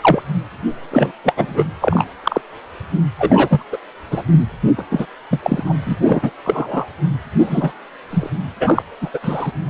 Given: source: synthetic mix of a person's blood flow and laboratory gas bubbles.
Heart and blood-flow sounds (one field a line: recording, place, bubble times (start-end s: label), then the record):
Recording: Doppler ultrasound of blood flow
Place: precordium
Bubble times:
0.00-0.23 s: bubbles
0.90-1.12 s: bubbles
1.23-1.33 s: bubbles
1.36-1.65 s: bubbles
1.80-2.04 s: bubbles
2.23-2.41 s: bubbles
3.19-3.63 s: bubbles
3.71-3.77 s: bubbles
4.11-4.23 s: bubbles
4.78-4.83 s: bubbles
4.90-5.06 s: bubbles
5.31-5.64 s: bubbles
5.66-5.74 s: bubbles
5.81-6.31 s: bubbles
6.44-6.86 s: bubbles
7.40-7.73 s: bubbles
8.11-8.30 s: bubbles
8.60-8.83 s: bubbles
9.02-9.10 s: bubbles
9.13-9.20 s: bubbles
9.22-9.52 s: bubbles
From the record:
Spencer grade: 3 (all of the cardiac periods contain showers or single bubble signals, but not dominating or overriding the cardiac motion signals)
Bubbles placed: anywhere in the cardiac cycle